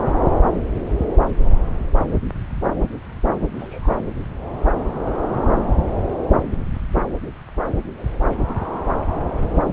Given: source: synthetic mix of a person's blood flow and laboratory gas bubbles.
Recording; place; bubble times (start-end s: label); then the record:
Doppler ultrasound of blood flow; subclavian vein
3.58-3.99 s: bubbles
From the record:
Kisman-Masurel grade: 112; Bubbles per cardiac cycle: 1 to 2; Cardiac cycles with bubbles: 1 to 10%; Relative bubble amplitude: moderate (0.250 to 0.450); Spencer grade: 1 (occasional bubble signal discernible with the cardiac motion signal, with majority of cardiac periods free of bubbles); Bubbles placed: anywhere in the cardiac cycle